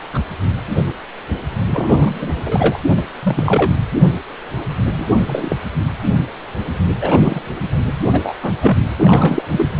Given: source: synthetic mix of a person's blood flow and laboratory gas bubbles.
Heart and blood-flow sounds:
Doppler ultrasound of blood flow; precordium
0.14-0.19 s: bubbles
1.70-2.80 s: bubbles
2.96-3.07 s: bubbles
3.23-3.77 s: bubbles
4.96-5.07 s: bubbles
5.25-5.56 s: bubbles
7.01-7.41 s: bubbles
8.11-8.33 s: bubbles
8.42-8.52 s: bubbles
8.61-8.77 s: bubbles
8.97-9.42 s: bubbles
9.51-9.69 s: bubbles
From the record:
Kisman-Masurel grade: 232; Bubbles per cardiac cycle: several, 3 to 8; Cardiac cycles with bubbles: 50 to 99%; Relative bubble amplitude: moderate (0.250 to 0.450); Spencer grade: 3 (all of the cardiac periods contain showers or single bubble signals, but not dominating or overriding the cardiac motion signals); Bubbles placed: anywhere in the cardiac cycle

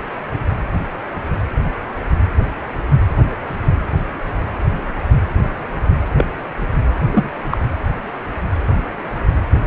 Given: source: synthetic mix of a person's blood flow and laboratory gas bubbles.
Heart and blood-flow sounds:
Doppler ultrasound of blood flow; precordium
6.18-6.24 s: bubbles
7.12-7.30 s: bubbles
7.49-7.57 s: bubbles
From the record:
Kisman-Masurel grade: 123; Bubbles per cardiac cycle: 1 to 2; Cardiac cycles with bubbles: 10 to 50%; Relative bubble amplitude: loud (0.450 to 0.775); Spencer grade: 2 (many but less than half of the cardiac periods contain bubble signals, singularly or in groups); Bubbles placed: anywhere in the cardiac cycle

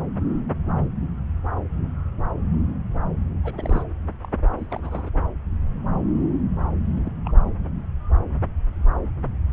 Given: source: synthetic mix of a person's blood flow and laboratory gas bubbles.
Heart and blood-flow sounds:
Doppler ultrasound of blood flow; subclavian vein
3.42-3.83 s: bubbles
4.22-4.32 s: bubbles
4.58-4.67 s: bubbles
4.70-5.10 s: bubbles
6.95-7.11 s: bubbles
7.25-7.32 s: bubbles
From the record:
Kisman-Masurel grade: 221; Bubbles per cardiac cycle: several, 3 to 8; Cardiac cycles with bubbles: 10 to 50%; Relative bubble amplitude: barely perceptible (0.100 to 0.250); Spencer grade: 2 (many but less than half of the cardiac periods contain bubble signals, singularly or in groups); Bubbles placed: anywhere in the cardiac cycle

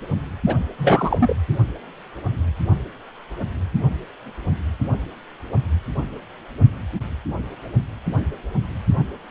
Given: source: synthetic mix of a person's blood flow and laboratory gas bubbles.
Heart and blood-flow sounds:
Doppler ultrasound of blood flow; precordium
0.47-0.55 s: bubbles
0.78-1.34 s: bubbles
From the record:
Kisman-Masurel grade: 212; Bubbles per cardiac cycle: several, 3 to 8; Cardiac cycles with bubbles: 1 to 10%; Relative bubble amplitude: moderate (0.250 to 0.450); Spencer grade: 1 (occasional bubble signal discernible with the cardiac motion signal, with majority of cardiac periods free of bubbles); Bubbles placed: anywhere in the cardiac cycle

